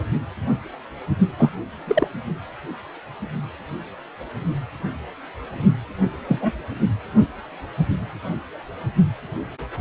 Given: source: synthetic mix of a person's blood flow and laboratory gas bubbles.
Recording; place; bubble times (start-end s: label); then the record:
Doppler ultrasound of blood flow; precordium
1.38-1.50 s: bubbles
1.87-2.08 s: bubbles
6.21-6.60 s: bubbles
From the record:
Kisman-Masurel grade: 122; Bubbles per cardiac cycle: 1 to 2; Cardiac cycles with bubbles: 10 to 50%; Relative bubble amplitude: moderate (0.250 to 0.450); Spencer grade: 2 (many but less than half of the cardiac periods contain bubble signals, singularly or in groups); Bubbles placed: only in the low amplitude regions of the cardiac cycle